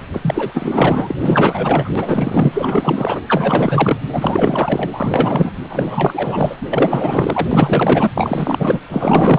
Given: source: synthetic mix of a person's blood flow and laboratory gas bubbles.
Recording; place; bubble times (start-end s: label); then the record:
Doppler ultrasound of blood flow; precordium
0.13-1.16 s: bubbles
1.19-1.90 s: bubbles
1.95-3.22 s: bubbles
3.27-4.01 s: bubbles
4.12-4.88 s: bubbles
4.92-5.50 s: bubbles
5.69-6.56 s: bubbles
6.61-7.47 s: bubbles
7.51-8.11 s: bubbles
8.14-8.78 s: bubbles
8.88-9.39 s: bubbles
From the record:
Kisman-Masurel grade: 444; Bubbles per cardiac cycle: continuous sound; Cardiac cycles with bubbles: 100%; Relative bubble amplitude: maximal (0.775 to 0.999); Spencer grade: 4 (maximum detectable bubble signal sounding continuously throughout systole and diastole of every cardiac period, and overriding the amplitude of the normal cardiac signals); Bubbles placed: anywhere in the cardiac cycle